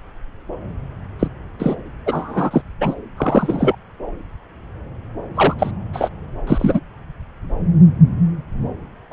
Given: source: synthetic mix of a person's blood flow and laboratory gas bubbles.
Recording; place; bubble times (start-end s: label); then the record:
Doppler ultrasound of blood flow; subclavian vein
1.19-1.28 s: bubbles
1.59-1.76 s: bubbles
2.06-2.62 s: bubbles
2.80-2.94 s: bubbles
3.17-3.75 s: bubbles
5.35-5.54 s: bubbles
5.58-5.71 s: bubbles
5.93-6.09 s: bubbles
6.47-6.80 s: bubbles
9.11-9.13 s: bubbles
From the record:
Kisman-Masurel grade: 233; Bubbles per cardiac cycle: several, 3 to 8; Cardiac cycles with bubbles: 50 to 99%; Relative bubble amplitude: loud (0.450 to 0.775); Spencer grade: 3 (all of the cardiac periods contain showers or single bubble signals, but not dominating or overriding the cardiac motion signals); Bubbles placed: anywhere in the cardiac cycle